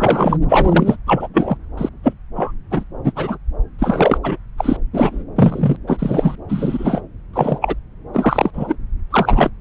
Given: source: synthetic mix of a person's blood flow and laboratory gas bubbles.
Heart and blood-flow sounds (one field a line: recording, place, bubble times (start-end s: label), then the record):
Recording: Doppler ultrasound of blood flow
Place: subclavian vein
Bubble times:
0.00-0.39 s: bubbles
0.48-0.96 s: bubbles
1.06-1.27 s: bubbles
1.33-1.57 s: bubbles
1.77-1.89 s: bubbles
2.03-2.13 s: bubbles
2.35-2.52 s: bubbles
2.71-2.84 s: bubbles
3.04-3.12 s: bubbles
3.15-3.38 s: bubbles
3.79-4.18 s: bubbles
4.23-4.38 s: bubbles
4.58-4.76 s: bubbles
4.93-5.25 s: bubbles
5.36-5.76 s: bubbles
5.87-6.35 s: bubbles
6.49-7.00 s: bubbles
7.33-7.75 s: bubbles
8.13-8.51 s: bubbles
8.53-8.76 s: bubbles
9.11-9.51 s: bubbles
From the record:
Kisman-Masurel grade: 243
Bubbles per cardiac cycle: several, 3 to 8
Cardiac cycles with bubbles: 100%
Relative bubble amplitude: loud (0.450 to 0.775)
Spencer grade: 3 (all of the cardiac periods contain showers or single bubble signals, but not dominating or overriding the cardiac motion signals)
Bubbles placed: anywhere in the cardiac cycle